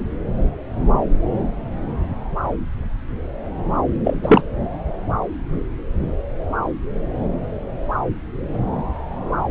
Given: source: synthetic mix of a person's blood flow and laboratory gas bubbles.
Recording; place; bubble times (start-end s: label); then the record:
Doppler ultrasound of blood flow; subclavian vein
4.04-4.17 s: bubbles
4.22-4.42 s: bubbles
From the record:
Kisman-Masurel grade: 213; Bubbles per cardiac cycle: several, 3 to 8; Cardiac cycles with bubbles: 1 to 10%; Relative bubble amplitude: loud (0.450 to 0.775); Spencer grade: 1 (occasional bubble signal discernible with the cardiac motion signal, with majority of cardiac periods free of bubbles); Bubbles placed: anywhere in the cardiac cycle